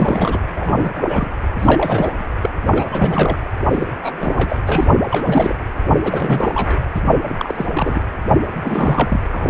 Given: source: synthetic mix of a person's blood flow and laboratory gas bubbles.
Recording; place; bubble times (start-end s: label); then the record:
Doppler ultrasound of blood flow; precordium
0.00-0.39 s: bubbles
0.49-0.91 s: bubbles
0.96-1.30 s: bubbles
1.59-2.27 s: bubbles
2.42-2.50 s: bubbles
2.71-3.38 s: bubbles
3.69-3.91 s: bubbles
3.98-4.61 s: bubbles
4.66-4.88 s: bubbles
5.09-5.55 s: bubbles
5.87-5.94 s: bubbles
6.04-6.78 s: bubbles
6.97-7.01 s: bubbles
7.05-7.17 s: bubbles
7.29-7.66 s: bubbles
7.73-8.02 s: bubbles
8.52-9.27 s: bubbles
9.32-9.49 s: bubbles
From the record:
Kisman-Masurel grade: 342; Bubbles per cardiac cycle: rolling drumbeat, 9 or more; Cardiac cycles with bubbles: 100%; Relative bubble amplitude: moderate (0.250 to 0.450); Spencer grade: 3 (all of the cardiac periods contain showers or single bubble signals, but not dominating or overriding the cardiac motion signals); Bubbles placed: anywhere in the cardiac cycle